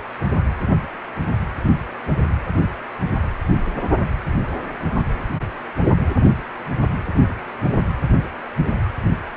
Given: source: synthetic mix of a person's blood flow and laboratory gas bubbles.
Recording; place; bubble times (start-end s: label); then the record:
Doppler ultrasound of blood flow; precordium
no bubbles
From the record:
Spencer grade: 0 (complete lack of bubble signals)